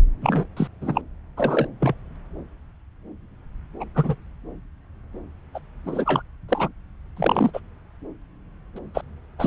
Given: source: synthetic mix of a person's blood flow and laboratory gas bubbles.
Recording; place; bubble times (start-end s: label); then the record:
Doppler ultrasound of blood flow; subclavian vein
0.22-0.46 s: bubbles
0.56-0.67 s: bubbles
0.81-1.02 s: bubbles
1.37-1.67 s: bubbles
1.80-1.94 s: bubbles
3.80-3.84 s: bubbles
3.94-4.15 s: bubbles
5.54-5.59 s: bubbles
5.86-6.22 s: bubbles
6.49-6.69 s: bubbles
7.17-7.51 s: bubbles
7.54-7.60 s: bubbles
8.76-8.79 s: bubbles
8.94-9.01 s: bubbles
9.38-9.47 s: bubbles
From the record:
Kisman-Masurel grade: 232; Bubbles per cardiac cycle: several, 3 to 8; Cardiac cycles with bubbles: 50 to 99%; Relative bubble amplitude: moderate (0.250 to 0.450); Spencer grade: 3 (all of the cardiac periods contain showers or single bubble signals, but not dominating or overriding the cardiac motion signals); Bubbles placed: anywhere in the cardiac cycle